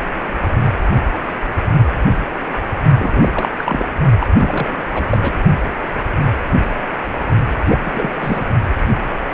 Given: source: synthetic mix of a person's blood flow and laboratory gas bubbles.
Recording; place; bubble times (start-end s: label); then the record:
Doppler ultrasound of blood flow; precordium
2.99-3.49 s: bubbles
3.59-3.85 s: bubbles
4.21-4.26 s: bubbles
4.38-4.86 s: bubbles
4.93-5.06 s: bubbles
5.09-5.18 s: bubbles
5.21-5.42 s: bubbles
7.65-7.78 s: bubbles
7.83-8.11 s: bubbles
8.21-8.46 s: bubbles
From the record:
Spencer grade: 3 (all of the cardiac periods contain showers or single bubble signals, but not dominating or overriding the cardiac motion signals); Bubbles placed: only in the low amplitude regions of the cardiac cycle